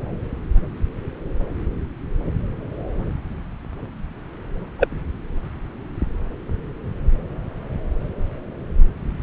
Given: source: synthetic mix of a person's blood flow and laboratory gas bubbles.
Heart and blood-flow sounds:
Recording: Doppler ultrasound of blood flow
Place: subclavian vein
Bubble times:
4.79-4.88 s: bubbles
From the record:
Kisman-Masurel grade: 113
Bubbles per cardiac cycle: 1 to 2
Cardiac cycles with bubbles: 1 to 10%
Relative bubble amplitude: loud (0.450 to 0.775)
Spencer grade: 1 (occasional bubble signal discernible with the cardiac motion signal, with majority of cardiac periods free of bubbles)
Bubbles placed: anywhere in the cardiac cycle

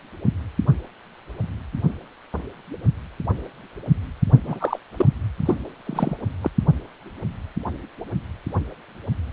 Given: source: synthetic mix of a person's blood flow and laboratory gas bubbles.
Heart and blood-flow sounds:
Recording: Doppler ultrasound of blood flow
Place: precordium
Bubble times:
4.44-4.79 s: bubbles
4.96-5.05 s: bubbles
5.46-5.55 s: bubbles
5.86-6.17 s: bubbles
6.41-6.50 s: bubbles
From the record:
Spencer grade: 2 (many but less than half of the cardiac periods contain bubble signals, singularly or in groups)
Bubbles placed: only in the low amplitude regions of the cardiac cycle

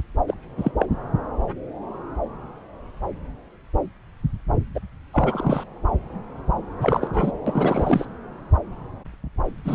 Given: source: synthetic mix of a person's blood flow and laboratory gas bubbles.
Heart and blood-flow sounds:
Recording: Doppler ultrasound of blood flow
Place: subclavian vein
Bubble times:
0.28-0.35 s: bubbles
0.58-0.72 s: bubbles
0.78-0.85 s: bubbles
4.75-4.81 s: bubbles
5.14-5.64 s: bubbles
6.81-7.32 s: bubbles
7.46-8.06 s: bubbles
9.64-9.75 s: bubbles
From the record:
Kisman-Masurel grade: 222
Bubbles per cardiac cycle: several, 3 to 8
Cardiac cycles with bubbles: 10 to 50%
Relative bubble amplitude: moderate (0.250 to 0.450)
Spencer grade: 2 (many but less than half of the cardiac periods contain bubble signals, singularly or in groups)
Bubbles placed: anywhere in the cardiac cycle

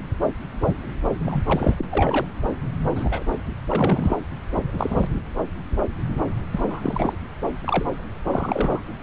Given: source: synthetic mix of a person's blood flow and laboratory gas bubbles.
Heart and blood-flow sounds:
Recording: Doppler ultrasound of blood flow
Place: subclavian vein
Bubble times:
1.26-1.39 s: bubbles
1.47-1.74 s: bubbles
1.78-1.85 s: bubbles
1.91-2.26 s: bubbles
2.83-3.23 s: bubbles
3.70-4.17 s: bubbles
4.74-5.08 s: bubbles
6.52-7.13 s: bubbles
7.64-7.85 s: bubbles
8.25-8.79 s: bubbles
From the record:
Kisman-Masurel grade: 232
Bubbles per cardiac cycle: several, 3 to 8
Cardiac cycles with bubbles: 50 to 99%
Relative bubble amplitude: moderate (0.250 to 0.450)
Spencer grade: 3 (all of the cardiac periods contain showers or single bubble signals, but not dominating or overriding the cardiac motion signals)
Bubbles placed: anywhere in the cardiac cycle

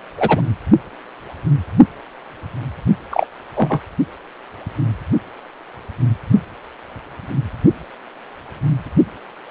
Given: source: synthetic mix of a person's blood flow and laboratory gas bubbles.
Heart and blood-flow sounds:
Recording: Doppler ultrasound of blood flow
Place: precordium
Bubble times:
0.17-0.41 s: bubbles
3.10-3.26 s: bubbles
3.56-3.80 s: bubbles
From the record:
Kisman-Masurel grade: 123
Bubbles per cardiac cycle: 1 to 2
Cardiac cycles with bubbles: 10 to 50%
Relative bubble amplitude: loud (0.450 to 0.775)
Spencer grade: 2 (many but less than half of the cardiac periods contain bubble signals, singularly or in groups)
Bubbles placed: only in the low amplitude regions of the cardiac cycle

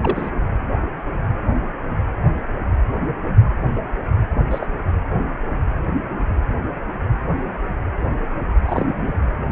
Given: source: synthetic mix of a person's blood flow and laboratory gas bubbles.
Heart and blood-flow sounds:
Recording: Doppler ultrasound of blood flow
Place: precordium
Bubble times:
0.01-0.30 s: bubbles
4.50-4.67 s: bubbles
8.65-9.19 s: bubbles
From the record:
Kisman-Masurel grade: 122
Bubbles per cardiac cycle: 1 to 2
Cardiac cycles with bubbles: 10 to 50%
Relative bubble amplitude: moderate (0.250 to 0.450)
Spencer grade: 2 (many but less than half of the cardiac periods contain bubble signals, singularly or in groups)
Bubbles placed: anywhere in the cardiac cycle

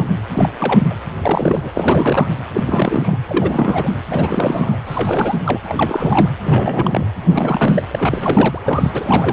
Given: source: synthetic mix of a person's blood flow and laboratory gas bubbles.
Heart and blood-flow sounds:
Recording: Doppler ultrasound of blood flow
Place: precordium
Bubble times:
0.00-0.08 s: bubbles
0.32-0.52 s: bubbles
0.58-0.87 s: bubbles
0.90-0.95 s: bubbles
1.23-1.70 s: bubbles
1.74-2.30 s: bubbles
2.54-3.18 s: bubbles
3.25-3.92 s: bubbles
4.10-4.79 s: bubbles
4.85-5.37 s: bubbles
5.45-5.58 s: bubbles
5.63-6.29 s: bubbles
6.44-7.08 s: bubbles
7.23-7.82 s: bubbles
7.91-9.33 s: bubbles
From the record:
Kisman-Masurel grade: 342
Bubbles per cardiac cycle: rolling drumbeat, 9 or more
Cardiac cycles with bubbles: 100%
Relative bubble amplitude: moderate (0.250 to 0.450)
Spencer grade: 3 (all of the cardiac periods contain showers or single bubble signals, but not dominating or overriding the cardiac motion signals)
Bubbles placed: anywhere in the cardiac cycle

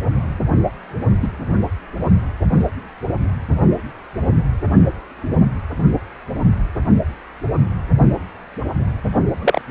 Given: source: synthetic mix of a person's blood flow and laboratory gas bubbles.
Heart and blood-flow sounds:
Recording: Doppler ultrasound of blood flow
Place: precordium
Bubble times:
1.22-1.28 s: bubbles
9.42-9.62 s: bubbles
From the record:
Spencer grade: 2 (many but less than half of the cardiac periods contain bubble signals, singularly or in groups)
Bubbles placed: only in the low amplitude regions of the cardiac cycle

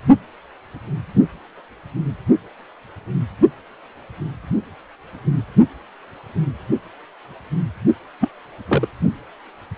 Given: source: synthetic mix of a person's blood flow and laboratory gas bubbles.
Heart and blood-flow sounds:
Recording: Doppler ultrasound of blood flow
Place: precordium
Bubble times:
8.20-8.29 s: bubbles
8.67-8.88 s: bubbles
From the record:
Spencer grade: 1 (occasional bubble signal discernible with the cardiac motion signal, with majority of cardiac periods free of bubbles)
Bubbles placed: only in the low amplitude regions of the cardiac cycle

